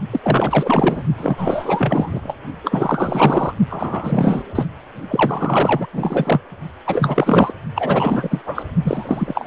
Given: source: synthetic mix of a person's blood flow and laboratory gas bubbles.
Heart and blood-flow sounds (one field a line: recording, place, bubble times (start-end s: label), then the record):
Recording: Doppler ultrasound of blood flow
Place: precordium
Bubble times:
0.10-0.20 s: bubbles
0.22-1.03 s: bubbles
1.17-2.36 s: bubbles
2.63-3.54 s: bubbles
3.70-4.43 s: bubbles
4.55-4.65 s: bubbles
5.09-5.87 s: bubbles
5.92-6.40 s: bubbles
6.86-7.52 s: bubbles
7.74-8.42 s: bubbles
8.45-8.63 s: bubbles
8.84-9.47 s: bubbles
From the record:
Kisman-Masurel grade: 444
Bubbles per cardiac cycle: continuous sound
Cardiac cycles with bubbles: 100%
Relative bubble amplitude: maximal (0.775 to 0.999)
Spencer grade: 4 (maximum detectable bubble signal sounding continuously throughout systole and diastole of every cardiac period, and overriding the amplitude of the normal cardiac signals)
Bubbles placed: only in the low amplitude regions of the cardiac cycle